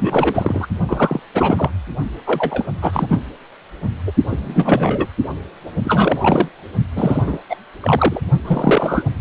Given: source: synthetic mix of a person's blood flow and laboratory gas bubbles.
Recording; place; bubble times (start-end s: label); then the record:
Doppler ultrasound of blood flow; precordium
0.00-0.68 s: bubbles
0.89-1.20 s: bubbles
1.33-1.70 s: bubbles
2.26-2.65 s: bubbles
2.81-3.21 s: bubbles
4.07-4.12 s: bubbles
4.29-5.06 s: bubbles
5.83-6.49 s: bubbles
6.96-7.39 s: bubbles
7.49-7.55 s: bubbles
7.81-8.20 s: bubbles
8.44-9.04 s: bubbles
From the record:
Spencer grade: 3 (all of the cardiac periods contain showers or single bubble signals, but not dominating or overriding the cardiac motion signals); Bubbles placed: only in the low amplitude regions of the cardiac cycle